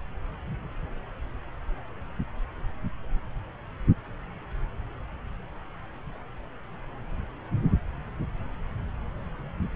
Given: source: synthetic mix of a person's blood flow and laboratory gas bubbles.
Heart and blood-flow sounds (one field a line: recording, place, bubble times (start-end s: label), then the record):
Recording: Doppler ultrasound of blood flow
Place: subclavian vein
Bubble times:
no bubbles
From the record:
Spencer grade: 0 (complete lack of bubble signals)